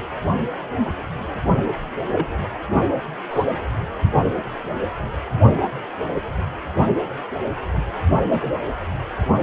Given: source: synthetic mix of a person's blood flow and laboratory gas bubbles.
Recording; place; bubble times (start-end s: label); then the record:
Doppler ultrasound of blood flow; precordium
2.12-2.27 s: bubbles
3.30-3.44 s: bubbles
8.07-8.22 s: bubbles
8.29-8.54 s: bubbles
From the record:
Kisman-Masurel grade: 122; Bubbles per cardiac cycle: 1 to 2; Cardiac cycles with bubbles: 10 to 50%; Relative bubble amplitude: moderate (0.250 to 0.450); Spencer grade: 2 (many but less than half of the cardiac periods contain bubble signals, singularly or in groups); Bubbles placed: anywhere in the cardiac cycle